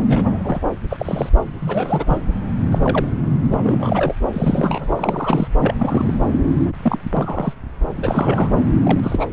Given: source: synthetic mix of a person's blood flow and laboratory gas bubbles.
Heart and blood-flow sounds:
Doppler ultrasound of blood flow; subclavian vein
0.06-0.59 s: bubbles
0.90-1.29 s: bubbles
1.59-2.04 s: bubbles
2.07-2.18 s: bubbles
2.71-2.79 s: bubbles
2.83-3.08 s: bubbles
3.44-3.46 s: bubbles
3.50-4.15 s: bubbles
4.33-5.48 s: bubbles
5.60-6.14 s: bubbles
6.65-6.71 s: bubbles
6.82-6.99 s: bubbles
7.17-7.54 s: bubbles
7.96-8.48 s: bubbles
8.83-9.32 s: bubbles
From the record:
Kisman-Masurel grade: 242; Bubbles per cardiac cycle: several, 3 to 8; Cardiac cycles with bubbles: 100%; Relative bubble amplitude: moderate (0.250 to 0.450); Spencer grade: 3 (all of the cardiac periods contain showers or single bubble signals, but not dominating or overriding the cardiac motion signals); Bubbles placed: anywhere in the cardiac cycle

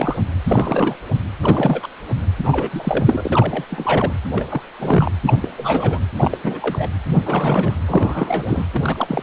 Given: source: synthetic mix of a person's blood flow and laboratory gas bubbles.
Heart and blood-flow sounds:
Doppler ultrasound of blood flow; precordium
0.00-0.17 s: bubbles
0.44-0.95 s: bubbles
1.42-1.88 s: bubbles
2.38-2.70 s: bubbles
2.73-3.64 s: bubbles
3.70-4.12 s: bubbles
4.31-4.47 s: bubbles
4.50-4.62 s: bubbles
4.79-5.12 s: bubbles
5.26-5.38 s: bubbles
5.41-5.49 s: bubbles
5.57-5.99 s: bubbles
6.17-6.38 s: bubbles
6.43-6.89 s: bubbles
7.06-7.18 s: bubbles
7.23-7.76 s: bubbles
7.87-8.67 s: bubbles
8.74-9.23 s: bubbles
From the record:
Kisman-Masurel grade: 342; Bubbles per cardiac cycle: rolling drumbeat, 9 or more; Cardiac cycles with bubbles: 100%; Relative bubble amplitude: moderate (0.250 to 0.450); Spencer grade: 3 (all of the cardiac periods contain showers or single bubble signals, but not dominating or overriding the cardiac motion signals); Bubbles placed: anywhere in the cardiac cycle

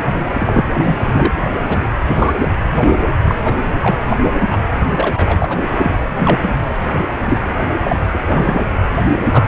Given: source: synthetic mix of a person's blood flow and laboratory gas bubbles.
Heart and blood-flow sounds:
Doppler ultrasound of blood flow; precordium
0.00-0.02 s: bubbles
0.38-0.65 s: bubbles
0.73-0.97 s: bubbles
1.12-1.51 s: bubbles
1.68-1.79 s: bubbles
2.06-2.33 s: bubbles
2.37-2.50 s: bubbles
2.79-2.96 s: bubbles
3.27-3.35 s: bubbles
3.44-3.54 s: bubbles
3.81-3.96 s: bubbles
4.10-4.17 s: bubbles
4.50-4.58 s: bubbles
4.96-5.62 s: bubbles
5.83-5.91 s: bubbles
6.04-6.51 s: bubbles
6.89-6.98 s: bubbles
7.25-7.41 s: bubbles
7.83-7.96 s: bubbles
8.12-8.18 s: bubbles
8.27-8.65 s: bubbles
9.31-9.45 s: bubbles
From the record:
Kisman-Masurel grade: 243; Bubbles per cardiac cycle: several, 3 to 8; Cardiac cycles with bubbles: 100%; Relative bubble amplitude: loud (0.450 to 0.775); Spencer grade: 3 (all of the cardiac periods contain showers or single bubble signals, but not dominating or overriding the cardiac motion signals); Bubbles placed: anywhere in the cardiac cycle

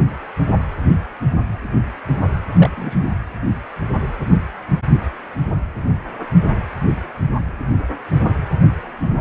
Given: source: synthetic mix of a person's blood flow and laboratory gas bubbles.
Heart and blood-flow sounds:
Doppler ultrasound of blood flow; precordium
2.54-3.09 s: bubbles
From the record:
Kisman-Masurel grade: 112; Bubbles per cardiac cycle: 1 to 2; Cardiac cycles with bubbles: 1 to 10%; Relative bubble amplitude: moderate (0.250 to 0.450); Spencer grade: 1 (occasional bubble signal discernible with the cardiac motion signal, with majority of cardiac periods free of bubbles); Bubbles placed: anywhere in the cardiac cycle

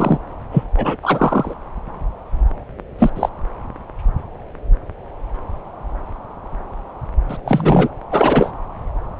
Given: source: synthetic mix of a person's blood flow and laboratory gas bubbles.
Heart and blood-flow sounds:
Doppler ultrasound of blood flow; subclavian vein
0.00-0.18 s: bubbles
0.52-0.64 s: bubbles
0.76-0.96 s: bubbles
1.02-1.55 s: bubbles
2.98-3.10 s: bubbles
3.15-3.29 s: bubbles
7.29-7.38 s: bubbles
7.45-7.88 s: bubbles
8.11-8.52 s: bubbles
From the record:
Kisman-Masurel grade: 223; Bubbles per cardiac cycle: several, 3 to 8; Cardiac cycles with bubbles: 10 to 50%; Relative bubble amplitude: loud (0.450 to 0.775); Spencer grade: 2 (many but less than half of the cardiac periods contain bubble signals, singularly or in groups); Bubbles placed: anywhere in the cardiac cycle

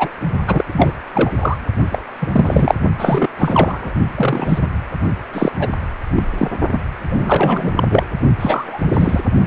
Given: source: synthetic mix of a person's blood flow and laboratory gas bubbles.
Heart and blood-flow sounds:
Doppler ultrasound of blood flow; precordium
0.00-0.09 s: bubbles
0.47-0.92 s: bubbles
1.14-1.31 s: bubbles
1.40-1.57 s: bubbles
1.91-2.02 s: bubbles
2.22-2.75 s: bubbles
2.99-3.28 s: bubbles
3.39-3.94 s: bubbles
4.15-4.68 s: bubbles
5.32-5.51 s: bubbles
5.58-5.70 s: bubbles
6.15-6.23 s: bubbles
6.38-6.48 s: bubbles
6.69-6.80 s: bubbles
7.10-7.72 s: bubbles
7.76-7.83 s: bubbles
7.89-8.03 s: bubbles
8.39-8.83 s: bubbles
8.87-9.21 s: bubbles
From the record:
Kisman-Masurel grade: 243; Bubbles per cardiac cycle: several, 3 to 8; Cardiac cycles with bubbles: 100%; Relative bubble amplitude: loud (0.450 to 0.775); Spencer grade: 3 (all of the cardiac periods contain showers or single bubble signals, but not dominating or overriding the cardiac motion signals); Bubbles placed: only in the low amplitude regions of the cardiac cycle

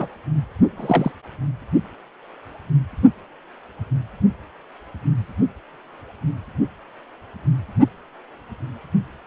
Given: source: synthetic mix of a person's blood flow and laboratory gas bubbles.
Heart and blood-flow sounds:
Doppler ultrasound of blood flow; precordium
0.00-0.07 s: bubbles
0.77-1.11 s: bubbles
From the record:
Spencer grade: 2 (many but less than half of the cardiac periods contain bubble signals, singularly or in groups); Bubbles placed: anywhere in the cardiac cycle

